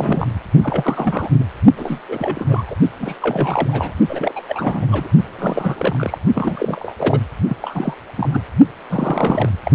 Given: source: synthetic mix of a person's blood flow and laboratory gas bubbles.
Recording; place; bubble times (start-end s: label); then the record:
Doppler ultrasound of blood flow; precordium
0.00-0.28 s: bubbles
0.62-1.29 s: bubbles
1.40-1.44 s: bubbles
1.77-2.00 s: bubbles
2.08-2.63 s: bubbles
2.67-2.75 s: bubbles
2.99-3.15 s: bubbles
3.20-3.93 s: bubbles
4.08-4.32 s: bubbles
4.36-4.44 s: bubbles
4.48-4.86 s: bubbles
4.91-5.08 s: bubbles
5.39-6.18 s: bubbles
6.35-6.94 s: bubbles
6.98-7.19 s: bubbles
7.49-7.58 s: bubbles
7.62-7.94 s: bubbles
8.17-8.41 s: bubbles
8.89-9.49 s: bubbles
9.65-9.71 s: bubbles
From the record:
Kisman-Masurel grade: 342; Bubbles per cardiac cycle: rolling drumbeat, 9 or more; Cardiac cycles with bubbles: 100%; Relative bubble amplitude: moderate (0.250 to 0.450); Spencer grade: 3 (all of the cardiac periods contain showers or single bubble signals, but not dominating or overriding the cardiac motion signals); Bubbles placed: only in the low amplitude regions of the cardiac cycle